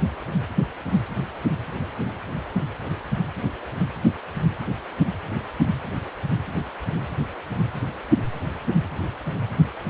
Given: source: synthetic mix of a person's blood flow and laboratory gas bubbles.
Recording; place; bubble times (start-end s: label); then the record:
Doppler ultrasound of blood flow; precordium
no bubbles
From the record:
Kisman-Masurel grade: 000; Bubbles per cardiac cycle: 0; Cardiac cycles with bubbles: 0%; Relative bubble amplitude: no bubbles discernible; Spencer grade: 0 (complete lack of bubble signals)